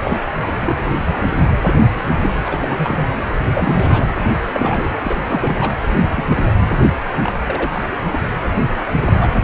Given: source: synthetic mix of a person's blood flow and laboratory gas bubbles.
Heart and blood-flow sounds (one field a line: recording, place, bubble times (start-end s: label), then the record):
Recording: Doppler ultrasound of blood flow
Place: precordium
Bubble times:
0.04-0.17 s: bubbles
0.41-0.48 s: bubbles
0.59-0.75 s: bubbles
0.84-0.91 s: bubbles
1.06-1.16 s: bubbles
1.40-1.55 s: bubbles
1.65-1.75 s: bubbles
1.89-2.01 s: bubbles
2.16-2.37 s: bubbles
2.45-2.58 s: bubbles
2.61-3.05 s: bubbles
3.54-4.09 s: bubbles
4.54-4.90 s: bubbles
5.04-5.16 s: bubbles
5.24-5.73 s: bubbles
6.02-6.26 s: bubbles
6.29-6.38 s: bubbles
6.46-6.51 s: bubbles
7.22-7.33 s: bubbles
7.46-7.83 s: bubbles
8.12-8.20 s: bubbles
9.04-9.35 s: bubbles
From the record:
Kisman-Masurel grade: 242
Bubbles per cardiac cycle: several, 3 to 8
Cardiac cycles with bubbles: 100%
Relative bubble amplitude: moderate (0.250 to 0.450)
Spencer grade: 3 (all of the cardiac periods contain showers or single bubble signals, but not dominating or overriding the cardiac motion signals)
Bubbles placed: anywhere in the cardiac cycle